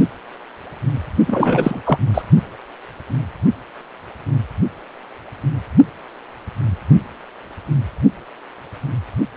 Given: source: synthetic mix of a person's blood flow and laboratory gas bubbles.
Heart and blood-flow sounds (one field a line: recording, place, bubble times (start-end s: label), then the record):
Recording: Doppler ultrasound of blood flow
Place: precordium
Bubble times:
1.27-1.82 s: bubbles
1.86-1.98 s: bubbles
2.14-2.22 s: bubbles
From the record:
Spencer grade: 1 (occasional bubble signal discernible with the cardiac motion signal, with majority of cardiac periods free of bubbles)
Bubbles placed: only in the low amplitude regions of the cardiac cycle